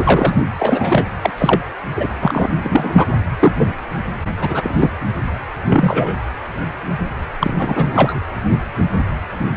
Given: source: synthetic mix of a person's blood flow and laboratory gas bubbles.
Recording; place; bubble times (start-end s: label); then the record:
Doppler ultrasound of blood flow; precordium
0.00-0.46 s: bubbles
0.59-1.04 s: bubbles
1.22-1.31 s: bubbles
1.38-1.60 s: bubbles
1.96-2.07 s: bubbles
2.21-2.50 s: bubbles
2.63-3.08 s: bubbles
3.40-3.53 s: bubbles
3.57-3.75 s: bubbles
4.40-4.89 s: bubbles
5.67-6.14 s: bubbles
7.39-7.54 s: bubbles
7.58-8.21 s: bubbles
From the record:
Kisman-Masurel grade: 233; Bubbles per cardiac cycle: several, 3 to 8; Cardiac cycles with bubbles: 50 to 99%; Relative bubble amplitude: loud (0.450 to 0.775); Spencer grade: 3 (all of the cardiac periods contain showers or single bubble signals, but not dominating or overriding the cardiac motion signals); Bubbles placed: anywhere in the cardiac cycle